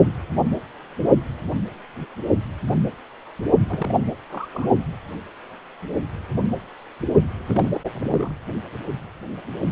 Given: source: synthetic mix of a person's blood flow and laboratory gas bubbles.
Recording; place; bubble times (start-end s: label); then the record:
Doppler ultrasound of blood flow; precordium
3.69-4.03 s: bubbles
4.29-4.49 s: bubbles
4.54-4.68 s: bubbles
7.46-7.78 s: bubbles
7.93-8.33 s: bubbles
From the record:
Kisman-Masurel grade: 221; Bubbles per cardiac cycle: several, 3 to 8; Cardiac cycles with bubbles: 10 to 50%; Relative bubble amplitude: barely perceptible (0.100 to 0.250); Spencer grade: 2 (many but less than half of the cardiac periods contain bubble signals, singularly or in groups); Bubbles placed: only in the low amplitude regions of the cardiac cycle